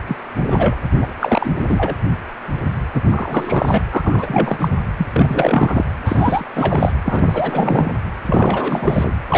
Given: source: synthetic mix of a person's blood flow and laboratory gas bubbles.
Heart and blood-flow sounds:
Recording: Doppler ultrasound of blood flow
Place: precordium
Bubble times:
0.08-0.16 s: bubbles
0.41-0.75 s: bubbles
0.94-1.06 s: bubbles
1.21-1.95 s: bubbles
2.94-3.84 s: bubbles
3.90-4.69 s: bubbles
4.97-5.07 s: bubbles
5.12-5.85 s: bubbles
6.05-6.44 s: bubbles
6.55-6.92 s: bubbles
7.05-7.92 s: bubbles
8.25-9.13 s: bubbles
9.29-9.38 s: bubbles
From the record:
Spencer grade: 3 (all of the cardiac periods contain showers or single bubble signals, but not dominating or overriding the cardiac motion signals)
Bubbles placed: anywhere in the cardiac cycle

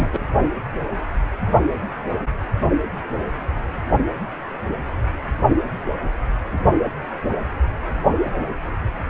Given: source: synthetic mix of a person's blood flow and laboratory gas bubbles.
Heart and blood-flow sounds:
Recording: Doppler ultrasound of blood flow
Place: precordium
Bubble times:
0.00-0.07 s: bubbles
0.12-0.18 s: bubbles
From the record:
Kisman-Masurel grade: 212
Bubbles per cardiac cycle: several, 3 to 8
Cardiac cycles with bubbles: 1 to 10%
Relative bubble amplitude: moderate (0.250 to 0.450)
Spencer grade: 1 (occasional bubble signal discernible with the cardiac motion signal, with majority of cardiac periods free of bubbles)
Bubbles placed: only in the low amplitude regions of the cardiac cycle

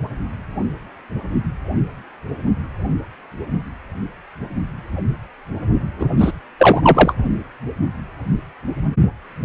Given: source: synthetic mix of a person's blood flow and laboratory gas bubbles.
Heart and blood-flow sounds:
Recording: Doppler ultrasound of blood flow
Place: precordium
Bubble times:
5.99-6.05 s: bubbles
6.17-6.32 s: bubbles
6.58-7.13 s: bubbles
From the record:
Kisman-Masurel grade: 213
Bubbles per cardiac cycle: several, 3 to 8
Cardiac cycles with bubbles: 1 to 10%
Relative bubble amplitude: loud (0.450 to 0.775)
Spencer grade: 1 (occasional bubble signal discernible with the cardiac motion signal, with majority of cardiac periods free of bubbles)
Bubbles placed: anywhere in the cardiac cycle

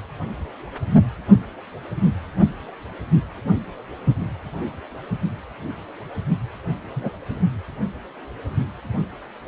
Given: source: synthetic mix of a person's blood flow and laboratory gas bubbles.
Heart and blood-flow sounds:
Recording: Doppler ultrasound of blood flow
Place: precordium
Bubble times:
6.96-7.09 s: bubbles
From the record:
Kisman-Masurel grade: 112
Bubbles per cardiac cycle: 1 to 2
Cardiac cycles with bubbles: 1 to 10%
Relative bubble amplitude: moderate (0.250 to 0.450)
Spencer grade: 1 (occasional bubble signal discernible with the cardiac motion signal, with majority of cardiac periods free of bubbles)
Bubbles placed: anywhere in the cardiac cycle

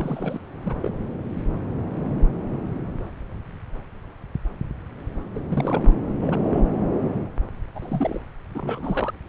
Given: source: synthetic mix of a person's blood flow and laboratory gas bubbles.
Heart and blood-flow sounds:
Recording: Doppler ultrasound of blood flow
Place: subclavian vein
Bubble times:
0.00-0.41 s: bubbles
0.63-0.76 s: bubbles
0.82-0.94 s: bubbles
5.35-5.39 s: bubbles
5.50-5.92 s: bubbles
6.19-6.60 s: bubbles
7.75-8.21 s: bubbles
8.54-9.11 s: bubbles
From the record:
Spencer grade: 2 (many but less than half of the cardiac periods contain bubble signals, singularly or in groups)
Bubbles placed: anywhere in the cardiac cycle

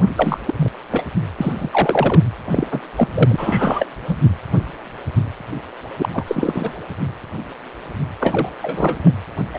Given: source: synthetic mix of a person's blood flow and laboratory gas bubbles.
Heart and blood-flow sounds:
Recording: Doppler ultrasound of blood flow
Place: precordium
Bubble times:
0.15-0.38 s: bubbles
0.47-0.53 s: bubbles
0.57-0.70 s: bubbles
0.91-1.05 s: bubbles
1.38-1.53 s: bubbles
1.59-2.23 s: bubbles
2.45-2.67 s: bubbles
2.71-2.81 s: bubbles
2.96-3.08 s: bubbles
3.15-3.86 s: bubbles
4.07-4.19 s: bubbles
5.98-6.08 s: bubbles
6.12-6.24 s: bubbles
6.27-6.73 s: bubbles
8.20-8.49 s: bubbles
8.61-9.13 s: bubbles
9.54-9.58 s: bubbles
From the record:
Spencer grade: 3 (all of the cardiac periods contain showers or single bubble signals, but not dominating or overriding the cardiac motion signals)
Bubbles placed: anywhere in the cardiac cycle

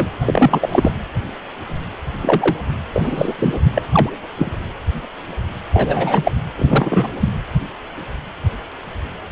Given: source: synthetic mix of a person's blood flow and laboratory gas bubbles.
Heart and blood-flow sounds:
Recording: Doppler ultrasound of blood flow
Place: precordium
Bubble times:
0.00-0.07 s: bubbles
0.25-0.92 s: bubbles
2.21-2.56 s: bubbles
2.92-3.35 s: bubbles
3.39-3.54 s: bubbles
3.75-3.82 s: bubbles
3.92-4.09 s: bubbles
4.38-4.51 s: bubbles
5.73-6.31 s: bubbles
6.58-7.11 s: bubbles
7.19-7.29 s: bubbles
From the record:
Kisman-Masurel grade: 233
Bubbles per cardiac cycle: several, 3 to 8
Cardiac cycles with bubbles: 50 to 99%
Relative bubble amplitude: loud (0.450 to 0.775)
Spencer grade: 3 (all of the cardiac periods contain showers or single bubble signals, but not dominating or overriding the cardiac motion signals)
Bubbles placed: anywhere in the cardiac cycle

